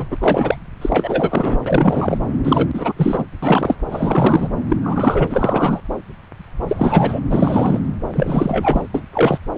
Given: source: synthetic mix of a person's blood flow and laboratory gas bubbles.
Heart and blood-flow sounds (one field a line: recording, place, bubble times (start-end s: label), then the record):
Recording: Doppler ultrasound of blood flow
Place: subclavian vein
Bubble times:
0.00-0.56 s: bubbles
0.81-1.57 s: bubbles
1.66-2.18 s: bubbles
2.44-2.68 s: bubbles
2.73-2.92 s: bubbles
2.96-3.24 s: bubbles
3.42-3.75 s: bubbles
3.90-4.48 s: bubbles
4.68-4.76 s: bubbles
4.83-5.80 s: bubbles
6.67-7.21 s: bubbles
7.30-7.80 s: bubbles
8.07-8.87 s: bubbles
8.94-9.04 s: bubbles
9.13-9.39 s: bubbles
From the record:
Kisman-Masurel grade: 333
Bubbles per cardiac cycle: rolling drumbeat, 9 or more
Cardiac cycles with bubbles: 50 to 99%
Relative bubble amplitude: loud (0.450 to 0.775)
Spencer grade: 3 (all of the cardiac periods contain showers or single bubble signals, but not dominating or overriding the cardiac motion signals)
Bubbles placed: anywhere in the cardiac cycle